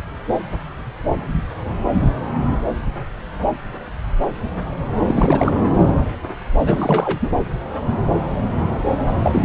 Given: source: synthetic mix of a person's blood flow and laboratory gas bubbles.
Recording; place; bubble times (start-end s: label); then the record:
Doppler ultrasound of blood flow; subclavian vein
4.95-5.55 s: bubbles
6.59-7.30 s: bubbles
9.06-9.14 s: bubbles
9.22-9.45 s: bubbles
From the record:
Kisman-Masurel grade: 222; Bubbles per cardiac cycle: several, 3 to 8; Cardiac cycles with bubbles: 10 to 50%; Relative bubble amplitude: moderate (0.250 to 0.450); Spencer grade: 2 (many but less than half of the cardiac periods contain bubble signals, singularly or in groups); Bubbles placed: anywhere in the cardiac cycle